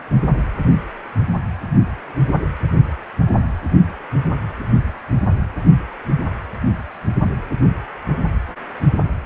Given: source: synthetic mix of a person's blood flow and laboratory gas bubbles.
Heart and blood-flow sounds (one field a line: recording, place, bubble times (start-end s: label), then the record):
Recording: Doppler ultrasound of blood flow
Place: precordium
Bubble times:
no bubbles
From the record:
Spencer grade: 0 (complete lack of bubble signals)